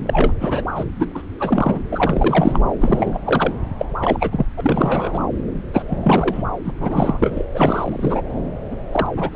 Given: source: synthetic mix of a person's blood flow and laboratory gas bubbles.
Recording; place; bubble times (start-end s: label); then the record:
Doppler ultrasound of blood flow; subclavian vein
0.05-0.33 s: bubbles
0.40-0.63 s: bubbles
0.75-0.84 s: bubbles
0.96-1.06 s: bubbles
1.15-1.23 s: bubbles
1.39-1.79 s: bubbles
1.90-2.59 s: bubbles
2.81-3.19 s: bubbles
3.25-3.53 s: bubbles
3.78-3.86 s: bubbles
4.02-4.46 s: bubbles
4.57-5.19 s: bubbles
5.73-5.83 s: bubbles
5.86-5.99 s: bubbles
6.03-6.43 s: bubbles
6.65-6.71 s: bubbles
6.80-7.44 s: bubbles
7.54-8.21 s: bubbles
8.70-8.78 s: bubbles
8.92-9.06 s: bubbles
9.17-9.36 s: bubbles
From the record:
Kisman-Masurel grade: 343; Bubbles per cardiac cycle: rolling drumbeat, 9 or more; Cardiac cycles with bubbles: 100%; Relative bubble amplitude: loud (0.450 to 0.775); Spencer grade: 3 (all of the cardiac periods contain showers or single bubble signals, but not dominating or overriding the cardiac motion signals); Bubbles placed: anywhere in the cardiac cycle